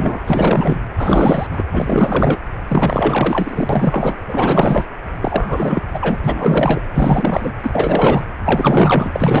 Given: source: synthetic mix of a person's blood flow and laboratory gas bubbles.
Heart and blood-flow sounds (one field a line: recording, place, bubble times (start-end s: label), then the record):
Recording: Doppler ultrasound of blood flow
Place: precordium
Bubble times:
0.00-0.23 s: bubbles
0.26-0.77 s: bubbles
0.97-1.47 s: bubbles
1.51-1.65 s: bubbles
1.71-2.38 s: bubbles
2.67-4.18 s: bubbles
4.29-4.85 s: bubbles
5.21-5.85 s: bubbles
5.93-6.20 s: bubbles
6.24-6.82 s: bubbles
6.94-7.53 s: bubbles
7.62-8.22 s: bubbles
8.44-9.40 s: bubbles
From the record:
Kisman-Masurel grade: 444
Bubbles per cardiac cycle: continuous sound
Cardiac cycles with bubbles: 100%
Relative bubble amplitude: maximal (0.775 to 0.999)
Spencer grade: 4 (maximum detectable bubble signal sounding continuously throughout systole and diastole of every cardiac period, and overriding the amplitude of the normal cardiac signals)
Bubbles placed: anywhere in the cardiac cycle